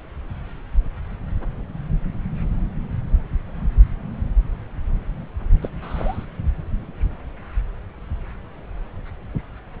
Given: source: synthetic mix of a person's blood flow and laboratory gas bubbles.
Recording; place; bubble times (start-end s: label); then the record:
Doppler ultrasound of blood flow; subclavian vein
5.61-5.68 s: bubbles
5.81-6.25 s: bubbles
From the record:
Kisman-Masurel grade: 112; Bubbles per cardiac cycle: 1 to 2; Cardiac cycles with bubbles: 1 to 10%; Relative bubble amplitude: moderate (0.250 to 0.450); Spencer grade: 1 (occasional bubble signal discernible with the cardiac motion signal, with majority of cardiac periods free of bubbles); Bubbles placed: anywhere in the cardiac cycle